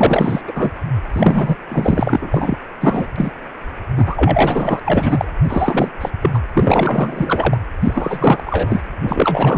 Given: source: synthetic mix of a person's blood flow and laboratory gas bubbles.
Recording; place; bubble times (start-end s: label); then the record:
Doppler ultrasound of blood flow; precordium
0.00-0.41 s: bubbles
0.47-0.70 s: bubbles
1.13-1.55 s: bubbles
1.69-2.58 s: bubbles
2.81-3.08 s: bubbles
3.16-3.31 s: bubbles
3.97-5.25 s: bubbles
5.43-5.90 s: bubbles
6.01-6.11 s: bubbles
6.22-6.31 s: bubbles
6.34-6.40 s: bubbles
6.53-7.58 s: bubbles
7.80-8.82 s: bubbles
9.01-9.58 s: bubbles
From the record:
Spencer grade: 4 (maximum detectable bubble signal sounding continuously throughout systole and diastole of every cardiac period, and overriding the amplitude of the normal cardiac signals); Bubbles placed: anywhere in the cardiac cycle